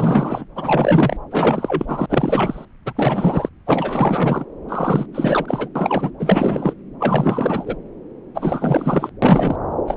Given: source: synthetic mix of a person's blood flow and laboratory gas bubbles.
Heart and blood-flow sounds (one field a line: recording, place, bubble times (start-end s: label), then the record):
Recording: Doppler ultrasound of blood flow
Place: subclavian vein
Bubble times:
0.00-0.45 s: bubbles
0.55-1.17 s: bubbles
1.30-2.06 s: bubbles
2.10-2.65 s: bubbles
2.85-3.49 s: bubbles
3.66-4.46 s: bubbles
4.69-5.06 s: bubbles
5.12-5.70 s: bubbles
5.75-6.11 s: bubbles
6.19-6.75 s: bubbles
7.00-7.77 s: bubbles
8.35-9.10 s: bubbles
9.22-9.56 s: bubbles
9.87-9.97 s: bubbles
From the record:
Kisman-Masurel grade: 444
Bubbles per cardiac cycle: continuous sound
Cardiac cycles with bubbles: 100%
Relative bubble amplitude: maximal (0.775 to 0.999)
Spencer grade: 4 (maximum detectable bubble signal sounding continuously throughout systole and diastole of every cardiac period, and overriding the amplitude of the normal cardiac signals)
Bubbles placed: anywhere in the cardiac cycle